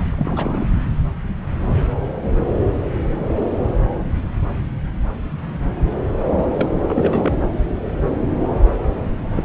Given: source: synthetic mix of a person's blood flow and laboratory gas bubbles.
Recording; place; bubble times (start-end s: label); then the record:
Doppler ultrasound of blood flow; subclavian vein
0.16-0.68 s: bubbles
6.31-6.45 s: bubbles
6.54-6.75 s: bubbles
6.87-7.35 s: bubbles
9.36-9.44 s: bubbles
From the record:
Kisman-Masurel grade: 222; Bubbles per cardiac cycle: several, 3 to 8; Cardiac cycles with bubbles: 10 to 50%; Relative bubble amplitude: moderate (0.250 to 0.450); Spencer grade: 2 (many but less than half of the cardiac periods contain bubble signals, singularly or in groups); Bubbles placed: anywhere in the cardiac cycle